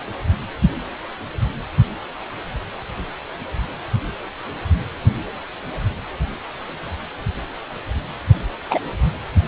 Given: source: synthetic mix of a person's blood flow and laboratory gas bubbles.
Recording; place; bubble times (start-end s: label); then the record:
Doppler ultrasound of blood flow; precordium
8.70-8.79 s: bubbles
From the record:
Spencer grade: 1 (occasional bubble signal discernible with the cardiac motion signal, with majority of cardiac periods free of bubbles); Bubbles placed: anywhere in the cardiac cycle